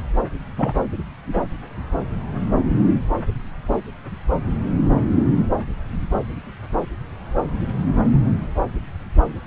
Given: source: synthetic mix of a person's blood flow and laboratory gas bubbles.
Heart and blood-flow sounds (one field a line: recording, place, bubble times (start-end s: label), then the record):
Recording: Doppler ultrasound of blood flow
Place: subclavian vein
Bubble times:
0.58-0.73 s: bubbles
From the record:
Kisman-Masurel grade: 112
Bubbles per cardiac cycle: 1 to 2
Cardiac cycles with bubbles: 1 to 10%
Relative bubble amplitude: moderate (0.250 to 0.450)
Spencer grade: 1 (occasional bubble signal discernible with the cardiac motion signal, with majority of cardiac periods free of bubbles)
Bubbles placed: anywhere in the cardiac cycle